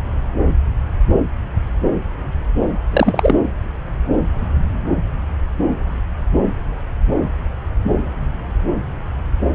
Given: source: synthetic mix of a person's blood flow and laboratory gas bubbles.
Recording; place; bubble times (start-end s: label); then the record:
Doppler ultrasound of blood flow; subclavian vein
2.91-3.34 s: bubbles
From the record:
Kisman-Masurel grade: 213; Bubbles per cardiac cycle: several, 3 to 8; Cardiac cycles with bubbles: 1 to 10%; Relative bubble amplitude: loud (0.450 to 0.775); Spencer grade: 1 (occasional bubble signal discernible with the cardiac motion signal, with majority of cardiac periods free of bubbles); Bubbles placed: anywhere in the cardiac cycle